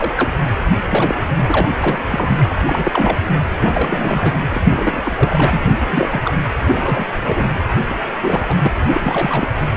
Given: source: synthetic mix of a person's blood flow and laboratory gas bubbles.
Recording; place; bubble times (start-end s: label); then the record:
Doppler ultrasound of blood flow; precordium
0.00-0.14 s: bubbles
0.17-0.29 s: bubbles
0.78-1.22 s: bubbles
1.35-1.70 s: bubbles
1.81-2.37 s: bubbles
2.50-3.18 s: bubbles
3.61-4.37 s: bubbles
4.50-4.61 s: bubbles
4.65-5.64 s: bubbles
5.67-6.33 s: bubbles
6.59-7.05 s: bubbles
7.21-7.47 s: bubbles
7.88-7.99 s: bubbles
8.22-8.57 s: bubbles
8.62-8.71 s: bubbles
8.93-9.52 s: bubbles
From the record:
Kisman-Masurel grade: 342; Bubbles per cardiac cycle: rolling drumbeat, 9 or more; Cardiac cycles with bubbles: 100%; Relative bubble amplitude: moderate (0.250 to 0.450); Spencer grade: 3 (all of the cardiac periods contain showers or single bubble signals, but not dominating or overriding the cardiac motion signals); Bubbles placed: anywhere in the cardiac cycle